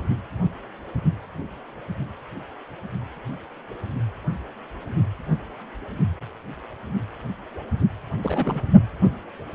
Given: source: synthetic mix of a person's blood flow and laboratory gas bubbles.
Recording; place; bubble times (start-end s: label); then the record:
Doppler ultrasound of blood flow; precordium
8.23-8.62 s: bubbles
From the record:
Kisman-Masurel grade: 211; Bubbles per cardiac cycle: several, 3 to 8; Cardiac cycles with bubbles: 1 to 10%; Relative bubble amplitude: barely perceptible (0.100 to 0.250); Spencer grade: 1 (occasional bubble signal discernible with the cardiac motion signal, with majority of cardiac periods free of bubbles); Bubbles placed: only in the low amplitude regions of the cardiac cycle